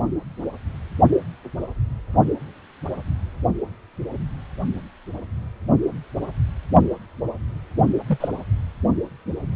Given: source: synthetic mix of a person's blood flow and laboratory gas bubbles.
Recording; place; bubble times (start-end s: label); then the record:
Doppler ultrasound of blood flow; precordium
8.06-8.28 s: bubbles
From the record:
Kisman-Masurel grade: 112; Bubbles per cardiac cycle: 1 to 2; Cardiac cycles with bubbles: 1 to 10%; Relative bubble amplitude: moderate (0.250 to 0.450); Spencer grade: 1 (occasional bubble signal discernible with the cardiac motion signal, with majority of cardiac periods free of bubbles); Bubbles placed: only in the low amplitude regions of the cardiac cycle